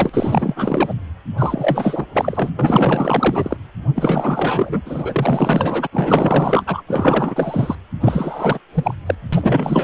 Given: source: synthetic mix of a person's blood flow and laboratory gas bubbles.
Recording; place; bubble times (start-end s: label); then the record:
Doppler ultrasound of blood flow; precordium
0.00-0.93 s: bubbles
1.38-2.07 s: bubbles
2.14-2.51 s: bubbles
2.59-3.57 s: bubbles
3.96-4.81 s: bubbles
4.85-5.87 s: bubbles
5.92-6.82 s: bubbles
6.88-7.75 s: bubbles
8.01-8.59 s: bubbles
8.73-8.95 s: bubbles
9.06-9.15 s: bubbles
9.32-9.84 s: bubbles
From the record:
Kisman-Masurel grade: 444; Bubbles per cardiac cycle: continuous sound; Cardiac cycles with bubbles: 100%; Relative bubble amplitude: maximal (0.775 to 0.999); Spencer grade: 4 (maximum detectable bubble signal sounding continuously throughout systole and diastole of every cardiac period, and overriding the amplitude of the normal cardiac signals); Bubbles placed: anywhere in the cardiac cycle